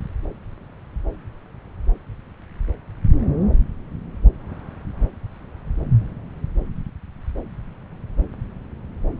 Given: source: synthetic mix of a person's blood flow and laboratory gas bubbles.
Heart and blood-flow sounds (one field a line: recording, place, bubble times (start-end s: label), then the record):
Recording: Doppler ultrasound of blood flow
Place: subclavian vein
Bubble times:
no bubbles
From the record:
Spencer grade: 0 (complete lack of bubble signals)